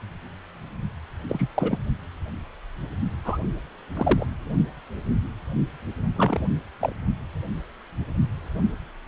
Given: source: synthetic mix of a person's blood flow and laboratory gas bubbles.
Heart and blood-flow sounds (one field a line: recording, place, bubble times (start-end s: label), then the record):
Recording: Doppler ultrasound of blood flow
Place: precordium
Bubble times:
1.29-1.49 s: bubbles
1.56-1.77 s: bubbles
3.25-3.38 s: bubbles
3.95-4.26 s: bubbles
6.16-6.48 s: bubbles
6.79-6.92 s: bubbles
From the record:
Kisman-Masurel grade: 222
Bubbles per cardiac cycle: several, 3 to 8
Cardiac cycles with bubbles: 10 to 50%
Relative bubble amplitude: moderate (0.250 to 0.450)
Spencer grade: 2 (many but less than half of the cardiac periods contain bubble signals, singularly or in groups)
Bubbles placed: only in the low amplitude regions of the cardiac cycle